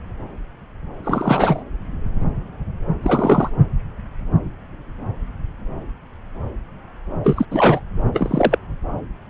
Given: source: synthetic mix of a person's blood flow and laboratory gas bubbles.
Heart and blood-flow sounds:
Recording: Doppler ultrasound of blood flow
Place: subclavian vein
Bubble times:
1.03-1.64 s: bubbles
3.03-3.50 s: bubbles
7.23-7.46 s: bubbles
7.50-7.82 s: bubbles
8.13-8.59 s: bubbles
From the record:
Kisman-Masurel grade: 223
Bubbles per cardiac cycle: several, 3 to 8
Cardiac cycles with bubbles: 10 to 50%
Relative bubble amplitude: loud (0.450 to 0.775)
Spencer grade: 2 (many but less than half of the cardiac periods contain bubble signals, singularly or in groups)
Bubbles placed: anywhere in the cardiac cycle

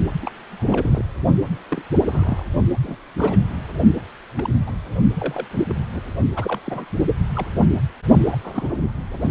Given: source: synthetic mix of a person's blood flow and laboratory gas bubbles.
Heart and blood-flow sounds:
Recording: Doppler ultrasound of blood flow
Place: precordium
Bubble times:
0.22-0.32 s: bubbles
0.51-1.05 s: bubbles
1.69-1.82 s: bubbles
2.05-2.46 s: bubbles
2.83-2.96 s: bubbles
3.17-3.38 s: bubbles
4.35-4.50 s: bubbles
4.66-4.72 s: bubbles
5.15-5.46 s: bubbles
5.51-5.64 s: bubbles
5.69-5.77 s: bubbles
5.93-6.01 s: bubbles
6.36-6.60 s: bubbles
6.65-6.85 s: bubbles
7.34-7.47 s: bubbles
8.24-8.38 s: bubbles
8.44-8.74 s: bubbles
8.80-8.91 s: bubbles
9.12-9.18 s: bubbles
9.21-9.31 s: bubbles
From the record:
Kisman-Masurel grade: 242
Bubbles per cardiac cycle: several, 3 to 8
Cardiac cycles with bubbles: 100%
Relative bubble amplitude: moderate (0.250 to 0.450)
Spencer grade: 3 (all of the cardiac periods contain showers or single bubble signals, but not dominating or overriding the cardiac motion signals)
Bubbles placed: only in the low amplitude regions of the cardiac cycle

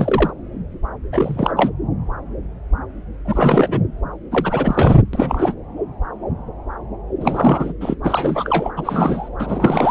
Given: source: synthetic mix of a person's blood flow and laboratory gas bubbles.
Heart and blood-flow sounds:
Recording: Doppler ultrasound of blood flow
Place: subclavian vein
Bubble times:
0.00-0.31 s: bubbles
1.12-1.52 s: bubbles
1.56-1.70 s: bubbles
3.25-3.80 s: bubbles
4.31-4.99 s: bubbles
5.13-5.55 s: bubbles
7.20-7.74 s: bubbles
7.80-7.95 s: bubbles
8.03-8.71 s: bubbles
8.77-9.29 s: bubbles
9.39-9.91 s: bubbles
From the record:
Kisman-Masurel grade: 333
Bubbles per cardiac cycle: rolling drumbeat, 9 or more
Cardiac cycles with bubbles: 50 to 99%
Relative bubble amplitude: loud (0.450 to 0.775)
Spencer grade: 3 (all of the cardiac periods contain showers or single bubble signals, but not dominating or overriding the cardiac motion signals)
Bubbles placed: anywhere in the cardiac cycle

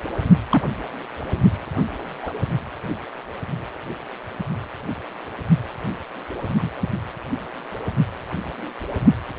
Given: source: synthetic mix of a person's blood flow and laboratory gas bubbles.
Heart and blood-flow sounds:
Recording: Doppler ultrasound of blood flow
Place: precordium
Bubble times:
0.49-0.62 s: bubbles
2.23-2.31 s: bubbles
6.57-6.69 s: bubbles
From the record:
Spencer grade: 2 (many but less than half of the cardiac periods contain bubble signals, singularly or in groups)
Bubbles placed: only in the low amplitude regions of the cardiac cycle

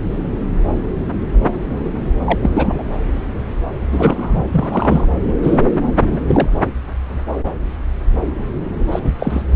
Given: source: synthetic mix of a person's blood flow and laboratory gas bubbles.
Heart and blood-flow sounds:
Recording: Doppler ultrasound of blood flow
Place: subclavian vein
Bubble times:
2.25-2.50 s: bubbles
2.53-2.83 s: bubbles
3.92-4.42 s: bubbles
4.52-5.07 s: bubbles
5.42-5.58 s: bubbles
6.00-6.21 s: bubbles
6.27-6.50 s: bubbles
8.91-8.99 s: bubbles
9.04-9.11 s: bubbles
9.18-9.45 s: bubbles
From the record:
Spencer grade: 2 (many but less than half of the cardiac periods contain bubble signals, singularly or in groups)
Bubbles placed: anywhere in the cardiac cycle

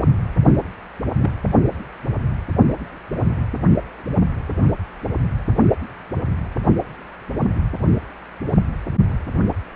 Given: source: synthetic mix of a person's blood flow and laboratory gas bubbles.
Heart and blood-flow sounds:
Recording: Doppler ultrasound of blood flow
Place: precordium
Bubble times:
1.22-1.30 s: bubbles
From the record:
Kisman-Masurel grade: 122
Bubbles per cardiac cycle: 1 to 2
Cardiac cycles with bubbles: 10 to 50%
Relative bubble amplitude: moderate (0.250 to 0.450)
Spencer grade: 2 (many but less than half of the cardiac periods contain bubble signals, singularly or in groups)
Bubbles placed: only in the low amplitude regions of the cardiac cycle

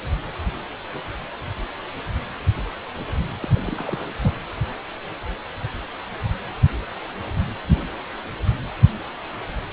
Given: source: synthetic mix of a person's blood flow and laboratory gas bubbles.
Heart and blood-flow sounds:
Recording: Doppler ultrasound of blood flow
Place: precordium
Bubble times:
3.42-3.47 s: bubbles
3.54-3.59 s: bubbles
3.67-4.08 s: bubbles
4.23-4.37 s: bubbles
From the record:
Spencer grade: 2 (many but less than half of the cardiac periods contain bubble signals, singularly or in groups)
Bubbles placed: anywhere in the cardiac cycle

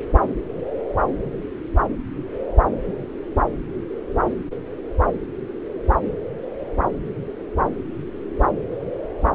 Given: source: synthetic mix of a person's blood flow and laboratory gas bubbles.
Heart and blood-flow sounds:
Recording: Doppler ultrasound of blood flow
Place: subclavian vein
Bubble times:
no bubbles
From the record:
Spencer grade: 0 (complete lack of bubble signals)

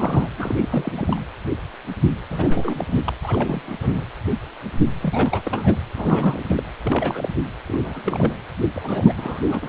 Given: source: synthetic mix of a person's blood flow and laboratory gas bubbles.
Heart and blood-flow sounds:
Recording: Doppler ultrasound of blood flow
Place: precordium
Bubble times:
0.00-0.30 s: bubbles
0.38-1.21 s: bubbles
2.30-3.00 s: bubbles
3.05-3.12 s: bubbles
3.23-3.76 s: bubbles
3.81-4.05 s: bubbles
5.02-5.42 s: bubbles
5.46-5.76 s: bubbles
5.95-6.63 s: bubbles
6.83-7.29 s: bubbles
7.67-8.36 s: bubbles
8.74-9.13 s: bubbles
9.17-9.69 s: bubbles
From the record:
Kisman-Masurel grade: 332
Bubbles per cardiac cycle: rolling drumbeat, 9 or more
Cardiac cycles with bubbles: 50 to 99%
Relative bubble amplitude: moderate (0.250 to 0.450)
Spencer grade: 3 (all of the cardiac periods contain showers or single bubble signals, but not dominating or overriding the cardiac motion signals)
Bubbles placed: anywhere in the cardiac cycle

